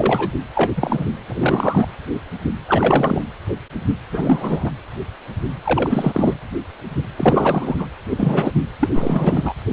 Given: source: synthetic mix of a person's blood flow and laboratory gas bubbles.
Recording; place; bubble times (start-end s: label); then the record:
Doppler ultrasound of blood flow; precordium
0.00-0.29 s: bubbles
0.54-0.74 s: bubbles
0.76-1.06 s: bubbles
1.27-1.87 s: bubbles
2.67-3.22 s: bubbles
4.12-4.73 s: bubbles
5.63-6.37 s: bubbles
7.17-7.87 s: bubbles
8.08-8.52 s: bubbles
8.80-8.89 s: bubbles
8.93-9.54 s: bubbles
From the record:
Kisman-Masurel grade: 333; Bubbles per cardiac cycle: rolling drumbeat, 9 or more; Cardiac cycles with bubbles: 50 to 99%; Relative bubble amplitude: loud (0.450 to 0.775); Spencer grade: 3 (all of the cardiac periods contain showers or single bubble signals, but not dominating or overriding the cardiac motion signals); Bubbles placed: anywhere in the cardiac cycle